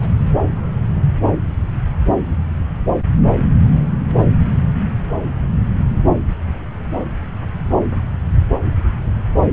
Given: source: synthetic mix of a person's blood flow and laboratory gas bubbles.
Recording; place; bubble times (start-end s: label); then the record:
Doppler ultrasound of blood flow; subclavian vein
0.01-0.17 s: bubbles
From the record:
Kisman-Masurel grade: 211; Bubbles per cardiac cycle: several, 3 to 8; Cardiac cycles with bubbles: 1 to 10%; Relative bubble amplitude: barely perceptible (0.100 to 0.250); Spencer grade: 1 (occasional bubble signal discernible with the cardiac motion signal, with majority of cardiac periods free of bubbles); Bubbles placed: anywhere in the cardiac cycle